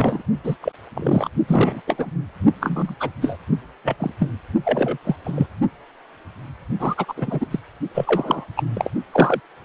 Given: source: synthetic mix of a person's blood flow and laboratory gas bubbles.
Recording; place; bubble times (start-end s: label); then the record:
Doppler ultrasound of blood flow; precordium
0.00-0.22 s: bubbles
0.44-0.56 s: bubbles
0.61-0.72 s: bubbles
0.95-1.29 s: bubbles
1.48-1.81 s: bubbles
1.87-2.10 s: bubbles
2.60-2.94 s: bubbles
3.00-3.10 s: bubbles
3.21-3.37 s: bubbles
3.84-3.95 s: bubbles
3.99-4.13 s: bubbles
4.20-4.29 s: bubbles
4.65-4.98 s: bubbles
5.04-5.16 s: bubbles
5.24-5.46 s: bubbles
6.79-7.13 s: bubbles
7.16-7.46 s: bubbles
7.50-7.59 s: bubbles
7.94-8.44 s: bubbles
8.56-8.63 s: bubbles
8.74-8.89 s: bubbles
9.12-9.40 s: bubbles
From the record:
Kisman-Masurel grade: 233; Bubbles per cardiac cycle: several, 3 to 8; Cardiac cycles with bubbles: 50 to 99%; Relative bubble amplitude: loud (0.450 to 0.775); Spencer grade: 3 (all of the cardiac periods contain showers or single bubble signals, but not dominating or overriding the cardiac motion signals); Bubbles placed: only in the low amplitude regions of the cardiac cycle